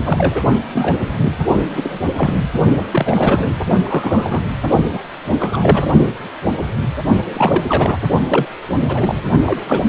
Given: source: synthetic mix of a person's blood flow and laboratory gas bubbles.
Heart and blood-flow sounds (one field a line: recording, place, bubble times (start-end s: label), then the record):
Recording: Doppler ultrasound of blood flow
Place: precordium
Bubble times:
0.04-0.42 s: bubbles
0.74-0.98 s: bubbles
1.20-1.32 s: bubbles
1.52-2.00 s: bubbles
2.15-2.40 s: bubbles
2.92-3.50 s: bubbles
3.83-4.44 s: bubbles
4.93-5.02 s: bubbles
5.39-5.89 s: bubbles
7.34-7.63 s: bubbles
7.67-7.97 s: bubbles
8.28-8.46 s: bubbles
8.75-9.15 s: bubbles
9.45-9.62 s: bubbles
9.67-9.83 s: bubbles
From the record:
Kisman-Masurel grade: 232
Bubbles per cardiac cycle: several, 3 to 8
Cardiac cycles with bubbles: 50 to 99%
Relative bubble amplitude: moderate (0.250 to 0.450)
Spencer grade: 3 (all of the cardiac periods contain showers or single bubble signals, but not dominating or overriding the cardiac motion signals)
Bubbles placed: only in the low amplitude regions of the cardiac cycle